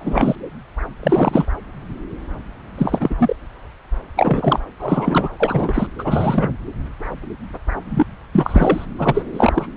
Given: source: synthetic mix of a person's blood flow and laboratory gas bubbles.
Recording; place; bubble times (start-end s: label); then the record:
Doppler ultrasound of blood flow; subclavian vein
0.00-0.35 s: bubbles
1.02-1.46 s: bubbles
2.77-3.14 s: bubbles
3.19-3.36 s: bubbles
4.17-4.60 s: bubbles
4.79-5.28 s: bubbles
5.39-5.86 s: bubbles
5.98-6.53 s: bubbles
7.90-8.05 s: bubbles
8.33-8.86 s: bubbles
8.98-9.23 s: bubbles
9.33-9.66 s: bubbles
From the record:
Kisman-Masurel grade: 333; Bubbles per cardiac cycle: rolling drumbeat, 9 or more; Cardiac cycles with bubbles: 50 to 99%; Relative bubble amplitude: loud (0.450 to 0.775); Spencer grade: 3 (all of the cardiac periods contain showers or single bubble signals, but not dominating or overriding the cardiac motion signals); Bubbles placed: anywhere in the cardiac cycle